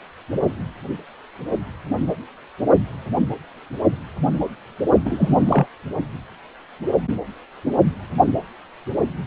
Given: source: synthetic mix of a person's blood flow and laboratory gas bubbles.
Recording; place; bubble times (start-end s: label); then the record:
Doppler ultrasound of blood flow; precordium
5.05-5.67 s: bubbles
From the record:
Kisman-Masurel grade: 223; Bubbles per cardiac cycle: several, 3 to 8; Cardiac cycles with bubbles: 10 to 50%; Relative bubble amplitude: loud (0.450 to 0.775); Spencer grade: 2 (many but less than half of the cardiac periods contain bubble signals, singularly or in groups); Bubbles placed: only in the low amplitude regions of the cardiac cycle